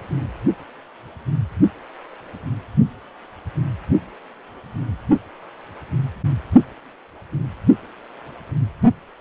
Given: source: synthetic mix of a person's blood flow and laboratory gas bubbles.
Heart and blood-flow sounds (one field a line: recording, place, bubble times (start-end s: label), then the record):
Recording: Doppler ultrasound of blood flow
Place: precordium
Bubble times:
no bubbles
From the record:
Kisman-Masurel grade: 000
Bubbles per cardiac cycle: 0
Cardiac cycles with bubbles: 0%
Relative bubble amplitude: no bubbles discernible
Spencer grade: 0 (complete lack of bubble signals)